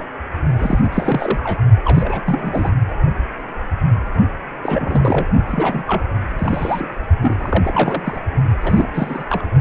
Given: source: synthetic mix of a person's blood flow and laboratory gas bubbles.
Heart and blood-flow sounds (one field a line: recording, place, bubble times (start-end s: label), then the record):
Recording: Doppler ultrasound of blood flow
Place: precordium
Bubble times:
0.58-0.79 s: bubbles
0.83-1.64 s: bubbles
1.84-2.73 s: bubbles
4.63-5.30 s: bubbles
5.47-5.84 s: bubbles
5.87-6.03 s: bubbles
6.38-6.88 s: bubbles
7.21-8.21 s: bubbles
8.62-9.24 s: bubbles
9.29-9.47 s: bubbles
From the record:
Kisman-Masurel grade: 332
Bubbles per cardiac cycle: rolling drumbeat, 9 or more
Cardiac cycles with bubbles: 50 to 99%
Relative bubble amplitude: moderate (0.250 to 0.450)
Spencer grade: 3 (all of the cardiac periods contain showers or single bubble signals, but not dominating or overriding the cardiac motion signals)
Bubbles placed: only in the low amplitude regions of the cardiac cycle